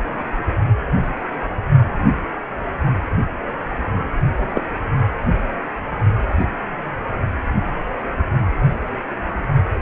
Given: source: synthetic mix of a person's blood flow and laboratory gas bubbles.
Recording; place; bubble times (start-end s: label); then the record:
Doppler ultrasound of blood flow; precordium
4.55-4.61 s: bubbles
From the record:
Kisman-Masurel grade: 112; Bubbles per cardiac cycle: 1 to 2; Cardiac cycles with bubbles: 1 to 10%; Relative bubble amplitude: moderate (0.250 to 0.450); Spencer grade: 1 (occasional bubble signal discernible with the cardiac motion signal, with majority of cardiac periods free of bubbles); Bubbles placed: anywhere in the cardiac cycle